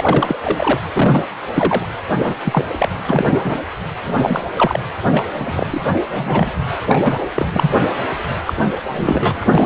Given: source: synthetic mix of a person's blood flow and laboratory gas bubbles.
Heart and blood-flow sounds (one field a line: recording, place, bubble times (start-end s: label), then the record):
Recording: Doppler ultrasound of blood flow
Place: precordium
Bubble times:
0.00-0.38 s: bubbles
0.43-0.81 s: bubbles
0.92-1.25 s: bubbles
1.54-1.86 s: bubbles
2.17-2.35 s: bubbles
2.44-2.65 s: bubbles
2.78-2.89 s: bubbles
3.07-3.40 s: bubbles
3.43-3.59 s: bubbles
4.04-4.45 s: bubbles
4.56-4.83 s: bubbles
5.12-5.25 s: bubbles
5.39-5.81 s: bubbles
6.08-6.52 s: bubbles
6.87-7.30 s: bubbles
7.34-7.83 s: bubbles
8.46-8.54 s: bubbles
8.93-9.46 s: bubbles
9.55-9.66 s: bubbles
From the record:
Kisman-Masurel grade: 243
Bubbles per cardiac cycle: several, 3 to 8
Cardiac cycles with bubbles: 100%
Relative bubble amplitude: loud (0.450 to 0.775)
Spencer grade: 3 (all of the cardiac periods contain showers or single bubble signals, but not dominating or overriding the cardiac motion signals)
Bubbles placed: anywhere in the cardiac cycle